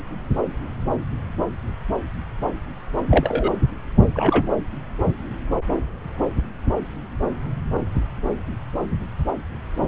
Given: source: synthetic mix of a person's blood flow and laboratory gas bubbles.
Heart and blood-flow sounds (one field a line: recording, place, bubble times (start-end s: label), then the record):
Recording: Doppler ultrasound of blood flow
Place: subclavian vein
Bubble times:
3.10-3.50 s: bubbles
4.13-4.52 s: bubbles
From the record:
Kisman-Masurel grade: 113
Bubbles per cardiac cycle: 1 to 2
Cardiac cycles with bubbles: 1 to 10%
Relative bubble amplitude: loud (0.450 to 0.775)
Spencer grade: 1 (occasional bubble signal discernible with the cardiac motion signal, with majority of cardiac periods free of bubbles)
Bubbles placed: anywhere in the cardiac cycle